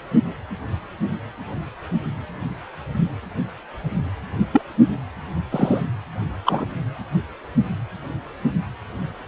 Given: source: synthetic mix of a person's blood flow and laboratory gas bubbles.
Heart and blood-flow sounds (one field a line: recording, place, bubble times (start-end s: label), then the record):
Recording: Doppler ultrasound of blood flow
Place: precordium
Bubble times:
4.38-4.46 s: bubbles
4.52-4.62 s: bubbles
5.51-5.81 s: bubbles
6.46-6.65 s: bubbles
From the record:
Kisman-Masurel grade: 123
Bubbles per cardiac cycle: 1 to 2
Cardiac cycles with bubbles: 10 to 50%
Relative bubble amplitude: loud (0.450 to 0.775)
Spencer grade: 2 (many but less than half of the cardiac periods contain bubble signals, singularly or in groups)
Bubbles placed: anywhere in the cardiac cycle